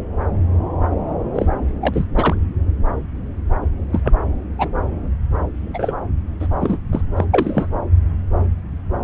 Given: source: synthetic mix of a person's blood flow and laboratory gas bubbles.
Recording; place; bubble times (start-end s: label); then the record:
Doppler ultrasound of blood flow; subclavian vein
1.35-1.46 s: bubbles
1.81-2.04 s: bubbles
2.16-2.35 s: bubbles
3.92-4.00 s: bubbles
4.04-4.13 s: bubbles
4.58-4.68 s: bubbles
5.54-5.93 s: bubbles
6.40-6.47 s: bubbles
6.60-6.78 s: bubbles
6.92-7.01 s: bubbles
7.17-7.25 s: bubbles
7.33-7.66 s: bubbles
From the record:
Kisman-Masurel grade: 222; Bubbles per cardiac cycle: several, 3 to 8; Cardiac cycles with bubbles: 10 to 50%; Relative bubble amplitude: moderate (0.250 to 0.450); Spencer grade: 2 (many but less than half of the cardiac periods contain bubble signals, singularly or in groups); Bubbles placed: anywhere in the cardiac cycle